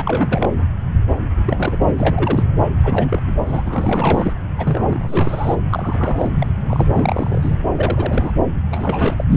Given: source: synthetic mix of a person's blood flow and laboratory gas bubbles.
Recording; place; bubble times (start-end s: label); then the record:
Doppler ultrasound of blood flow; subclavian vein
0.00-0.49 s: bubbles
1.46-1.91 s: bubbles
1.97-2.44 s: bubbles
2.83-3.22 s: bubbles
3.27-3.33 s: bubbles
3.45-3.62 s: bubbles
3.66-4.33 s: bubbles
4.58-5.56 s: bubbles
5.69-6.30 s: bubbles
6.38-6.46 s: bubbles
6.69-7.57 s: bubbles
7.75-8.32 s: bubbles
8.70-9.25 s: bubbles
9.32-9.37 s: bubbles
From the record:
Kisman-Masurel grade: 342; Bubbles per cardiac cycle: rolling drumbeat, 9 or more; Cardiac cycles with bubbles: 100%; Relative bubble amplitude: moderate (0.250 to 0.450); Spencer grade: 3 (all of the cardiac periods contain showers or single bubble signals, but not dominating or overriding the cardiac motion signals); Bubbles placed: anywhere in the cardiac cycle